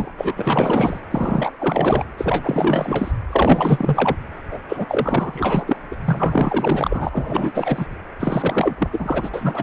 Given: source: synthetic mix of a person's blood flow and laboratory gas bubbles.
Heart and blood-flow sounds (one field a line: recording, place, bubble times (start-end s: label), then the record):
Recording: Doppler ultrasound of blood flow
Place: precordium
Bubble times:
0.00-0.11 s: bubbles
0.18-0.99 s: bubbles
1.10-2.04 s: bubbles
2.17-3.11 s: bubbles
3.29-4.16 s: bubbles
4.50-4.59 s: bubbles
4.68-4.85 s: bubbles
4.88-5.76 s: bubbles
5.92-5.96 s: bubbles
6.04-7.09 s: bubbles
7.12-7.86 s: bubbles
8.19-9.30 s: bubbles
9.34-9.63 s: bubbles
From the record:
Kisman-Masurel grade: 444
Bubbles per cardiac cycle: continuous sound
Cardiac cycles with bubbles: 100%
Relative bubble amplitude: maximal (0.775 to 0.999)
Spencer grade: 4 (maximum detectable bubble signal sounding continuously throughout systole and diastole of every cardiac period, and overriding the amplitude of the normal cardiac signals)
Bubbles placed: anywhere in the cardiac cycle